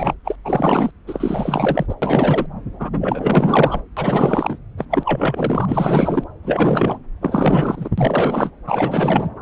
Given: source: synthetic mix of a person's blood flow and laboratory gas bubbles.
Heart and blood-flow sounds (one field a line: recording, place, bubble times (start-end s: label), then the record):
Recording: Doppler ultrasound of blood flow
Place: subclavian vein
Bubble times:
0.00-0.14 s: bubbles
0.24-0.36 s: bubbles
0.44-0.91 s: bubbles
1.07-1.86 s: bubbles
1.89-1.95 s: bubbles
2.02-2.46 s: bubbles
2.79-2.90 s: bubbles
2.92-3.82 s: bubbles
3.96-4.58 s: bubbles
4.77-4.85 s: bubbles
4.91-6.25 s: bubbles
6.42-6.98 s: bubbles
7.21-7.89 s: bubbles
7.97-8.51 s: bubbles
8.67-9.30 s: bubbles
From the record:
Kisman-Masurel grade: 444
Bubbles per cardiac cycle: continuous sound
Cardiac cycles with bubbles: 100%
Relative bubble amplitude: maximal (0.775 to 0.999)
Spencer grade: 4 (maximum detectable bubble signal sounding continuously throughout systole and diastole of every cardiac period, and overriding the amplitude of the normal cardiac signals)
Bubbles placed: anywhere in the cardiac cycle